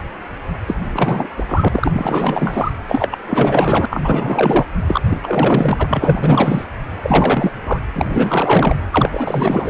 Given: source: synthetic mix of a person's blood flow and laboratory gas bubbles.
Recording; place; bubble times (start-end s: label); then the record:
Doppler ultrasound of blood flow; precordium
0.67-0.77 s: bubbles
0.92-1.28 s: bubbles
1.38-1.45 s: bubbles
1.49-1.69 s: bubbles
1.72-2.72 s: bubbles
2.88-3.18 s: bubbles
3.27-3.86 s: bubbles
3.90-4.66 s: bubbles
4.87-5.01 s: bubbles
5.09-5.18 s: bubbles
5.23-6.65 s: bubbles
7.03-7.51 s: bubbles
7.65-7.79 s: bubbles
7.94-8.76 s: bubbles
8.92-9.70 s: bubbles
From the record:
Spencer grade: 4 (maximum detectable bubble signal sounding continuously throughout systole and diastole of every cardiac period, and overriding the amplitude of the normal cardiac signals); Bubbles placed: anywhere in the cardiac cycle